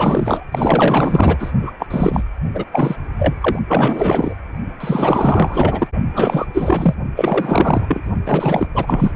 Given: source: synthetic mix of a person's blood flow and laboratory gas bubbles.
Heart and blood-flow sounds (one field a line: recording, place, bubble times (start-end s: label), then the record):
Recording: Doppler ultrasound of blood flow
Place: precordium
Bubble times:
0.00-0.45 s: bubbles
0.52-1.52 s: bubbles
1.62-1.72 s: bubbles
1.79-1.87 s: bubbles
1.90-2.23 s: bubbles
2.54-2.66 s: bubbles
2.72-2.96 s: bubbles
3.19-3.35 s: bubbles
3.41-3.59 s: bubbles
3.68-4.34 s: bubbles
4.80-5.88 s: bubbles
6.13-6.46 s: bubbles
6.53-6.94 s: bubbles
7.15-8.00 s: bubbles
8.25-8.68 s: bubbles
8.74-9.12 s: bubbles
From the record:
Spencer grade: 4 (maximum detectable bubble signal sounding continuously throughout systole and diastole of every cardiac period, and overriding the amplitude of the normal cardiac signals)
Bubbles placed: only in the low amplitude regions of the cardiac cycle